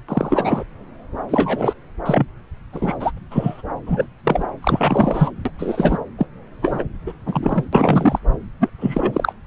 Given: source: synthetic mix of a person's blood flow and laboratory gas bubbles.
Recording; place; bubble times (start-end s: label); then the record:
Doppler ultrasound of blood flow; subclavian vein
0.08-0.64 s: bubbles
1.29-1.73 s: bubbles
2.06-2.25 s: bubbles
2.73-2.94 s: bubbles
3.00-3.11 s: bubbles
3.17-3.19 s: bubbles
3.31-3.62 s: bubbles
3.86-4.06 s: bubbles
4.25-4.48 s: bubbles
4.62-5.31 s: bubbles
5.45-5.51 s: bubbles
5.58-5.98 s: bubbles
6.18-6.27 s: bubbles
6.62-6.83 s: bubbles
7.06-7.13 s: bubbles
7.26-7.65 s: bubbles
7.73-8.19 s: bubbles
8.60-8.70 s: bubbles
8.80-9.32 s: bubbles
From the record:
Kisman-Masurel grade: 243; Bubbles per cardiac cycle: several, 3 to 8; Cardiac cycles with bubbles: 100%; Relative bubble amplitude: loud (0.450 to 0.775); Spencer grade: 3 (all of the cardiac periods contain showers or single bubble signals, but not dominating or overriding the cardiac motion signals); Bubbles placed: anywhere in the cardiac cycle